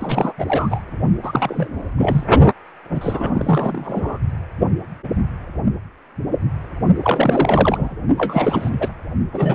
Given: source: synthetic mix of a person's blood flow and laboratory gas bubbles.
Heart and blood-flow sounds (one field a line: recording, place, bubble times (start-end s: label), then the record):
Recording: Doppler ultrasound of blood flow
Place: precordium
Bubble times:
0.00-0.33 s: bubbles
0.38-0.81 s: bubbles
1.23-1.83 s: bubbles
1.97-2.24 s: bubbles
2.92-4.18 s: bubbles
7.02-7.96 s: bubbles
8.18-8.92 s: bubbles
9.32-9.55 s: bubbles
From the record:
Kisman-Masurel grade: 332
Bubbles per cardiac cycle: rolling drumbeat, 9 or more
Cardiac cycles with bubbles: 50 to 99%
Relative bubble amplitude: moderate (0.250 to 0.450)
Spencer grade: 3 (all of the cardiac periods contain showers or single bubble signals, but not dominating or overriding the cardiac motion signals)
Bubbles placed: only in the low amplitude regions of the cardiac cycle